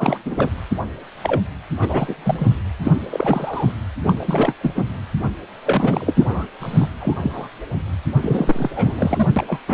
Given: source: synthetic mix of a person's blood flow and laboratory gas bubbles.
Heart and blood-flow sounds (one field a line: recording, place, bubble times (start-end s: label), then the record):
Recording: Doppler ultrasound of blood flow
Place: precordium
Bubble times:
0.00-0.18 s: bubbles
0.26-0.50 s: bubbles
1.22-1.40 s: bubbles
1.81-2.15 s: bubbles
2.25-2.53 s: bubbles
2.84-2.93 s: bubbles
3.11-3.72 s: bubbles
4.04-4.54 s: bubbles
4.61-4.73 s: bubbles
4.75-4.83 s: bubbles
5.65-6.47 s: bubbles
6.60-6.88 s: bubbles
7.00-7.14 s: bubbles
7.21-7.49 s: bubbles
8.21-8.72 s: bubbles
8.74-9.27 s: bubbles
9.36-9.44 s: bubbles
9.48-9.60 s: bubbles
9.68-9.74 s: bubbles
From the record:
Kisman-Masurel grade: 332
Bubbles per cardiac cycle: rolling drumbeat, 9 or more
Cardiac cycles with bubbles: 50 to 99%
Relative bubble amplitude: moderate (0.250 to 0.450)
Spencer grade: 3 (all of the cardiac periods contain showers or single bubble signals, but not dominating or overriding the cardiac motion signals)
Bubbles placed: anywhere in the cardiac cycle